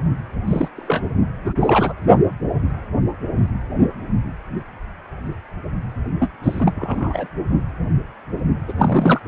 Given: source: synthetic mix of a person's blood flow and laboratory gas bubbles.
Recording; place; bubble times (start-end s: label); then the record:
Doppler ultrasound of blood flow; precordium
0.47-0.68 s: bubbles
0.76-1.03 s: bubbles
1.42-1.56 s: bubbles
1.60-1.93 s: bubbles
6.20-6.30 s: bubbles
6.42-6.72 s: bubbles
6.76-7.28 s: bubbles
8.68-8.73 s: bubbles
8.78-9.21 s: bubbles
From the record:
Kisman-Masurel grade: 232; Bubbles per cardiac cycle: several, 3 to 8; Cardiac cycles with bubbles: 50 to 99%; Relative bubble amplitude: moderate (0.250 to 0.450); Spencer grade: 3 (all of the cardiac periods contain showers or single bubble signals, but not dominating or overriding the cardiac motion signals); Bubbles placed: only in the low amplitude regions of the cardiac cycle